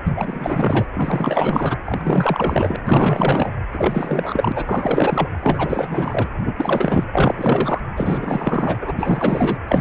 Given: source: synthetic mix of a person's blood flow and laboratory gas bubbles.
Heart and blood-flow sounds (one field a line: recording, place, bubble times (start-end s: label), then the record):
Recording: Doppler ultrasound of blood flow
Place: precordium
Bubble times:
0.05-0.85 s: bubbles
0.93-1.78 s: bubbles
1.85-2.76 s: bubbles
2.84-3.53 s: bubbles
3.73-5.29 s: bubbles
5.42-6.28 s: bubbles
6.45-6.54 s: bubbles
6.56-7.04 s: bubbles
7.12-7.79 s: bubbles
7.95-8.78 s: bubbles
8.81-8.93 s: bubbles
8.96-9.58 s: bubbles
9.68-9.81 s: bubbles
From the record:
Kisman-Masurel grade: 444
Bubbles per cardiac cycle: continuous sound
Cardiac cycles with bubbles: 100%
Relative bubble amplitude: maximal (0.775 to 0.999)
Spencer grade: 4 (maximum detectable bubble signal sounding continuously throughout systole and diastole of every cardiac period, and overriding the amplitude of the normal cardiac signals)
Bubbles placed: anywhere in the cardiac cycle